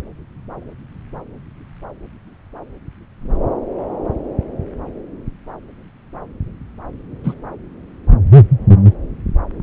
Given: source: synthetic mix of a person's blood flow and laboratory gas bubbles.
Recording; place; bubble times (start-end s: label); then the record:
Doppler ultrasound of blood flow; subclavian vein
7.23-7.34 s: bubbles
From the record:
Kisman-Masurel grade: 123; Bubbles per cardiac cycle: 1 to 2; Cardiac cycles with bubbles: 10 to 50%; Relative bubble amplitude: loud (0.450 to 0.775); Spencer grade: 2 (many but less than half of the cardiac periods contain bubble signals, singularly or in groups); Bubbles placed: anywhere in the cardiac cycle